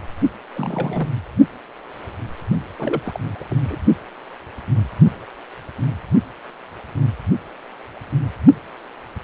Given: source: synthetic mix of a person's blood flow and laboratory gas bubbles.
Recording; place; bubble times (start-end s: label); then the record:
Doppler ultrasound of blood flow; precordium
0.55-1.08 s: bubbles
2.79-3.00 s: bubbles
3.04-3.20 s: bubbles
3.39-3.45 s: bubbles
3.50-3.57 s: bubbles
3.68-3.75 s: bubbles
From the record:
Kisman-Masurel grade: 221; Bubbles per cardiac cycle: several, 3 to 8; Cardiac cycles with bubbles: 10 to 50%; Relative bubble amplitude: barely perceptible (0.100 to 0.250); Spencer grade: 2 (many but less than half of the cardiac periods contain bubble signals, singularly or in groups); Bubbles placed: only in the low amplitude regions of the cardiac cycle